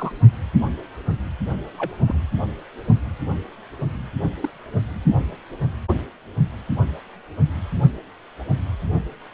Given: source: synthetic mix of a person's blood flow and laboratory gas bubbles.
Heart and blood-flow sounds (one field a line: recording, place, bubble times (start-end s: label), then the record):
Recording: Doppler ultrasound of blood flow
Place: precordium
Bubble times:
0.00-0.12 s: bubbles
1.77-2.03 s: bubbles
2.07-2.21 s: bubbles
4.40-4.49 s: bubbles
From the record:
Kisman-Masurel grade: 121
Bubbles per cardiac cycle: 1 to 2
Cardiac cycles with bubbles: 10 to 50%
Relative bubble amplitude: barely perceptible (0.100 to 0.250)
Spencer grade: 2 (many but less than half of the cardiac periods contain bubble signals, singularly or in groups)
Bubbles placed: anywhere in the cardiac cycle